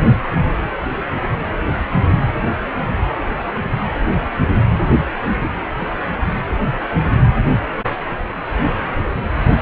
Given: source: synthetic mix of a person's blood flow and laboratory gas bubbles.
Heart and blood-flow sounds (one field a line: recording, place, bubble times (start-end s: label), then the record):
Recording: Doppler ultrasound of blood flow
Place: precordium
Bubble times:
5.36-5.49 s: bubbles
5.79-5.87 s: bubbles
From the record:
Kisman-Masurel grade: 122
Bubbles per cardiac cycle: 1 to 2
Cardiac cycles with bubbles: 10 to 50%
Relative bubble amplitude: moderate (0.250 to 0.450)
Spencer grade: 2 (many but less than half of the cardiac periods contain bubble signals, singularly or in groups)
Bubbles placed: anywhere in the cardiac cycle